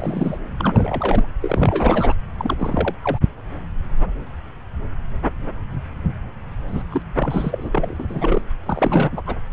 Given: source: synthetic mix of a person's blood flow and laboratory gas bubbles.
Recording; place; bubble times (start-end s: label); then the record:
Doppler ultrasound of blood flow; subclavian vein
0.00-0.38 s: bubbles
0.58-1.28 s: bubbles
1.42-2.14 s: bubbles
2.38-2.56 s: bubbles
2.60-2.95 s: bubbles
3.03-3.18 s: bubbles
6.67-6.83 s: bubbles
6.90-7.02 s: bubbles
7.16-8.42 s: bubbles
8.66-9.21 s: bubbles
9.26-9.36 s: bubbles
From the record:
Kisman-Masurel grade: 332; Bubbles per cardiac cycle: rolling drumbeat, 9 or more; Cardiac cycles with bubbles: 50 to 99%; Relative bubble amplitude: moderate (0.250 to 0.450); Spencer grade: 3 (all of the cardiac periods contain showers or single bubble signals, but not dominating or overriding the cardiac motion signals); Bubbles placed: anywhere in the cardiac cycle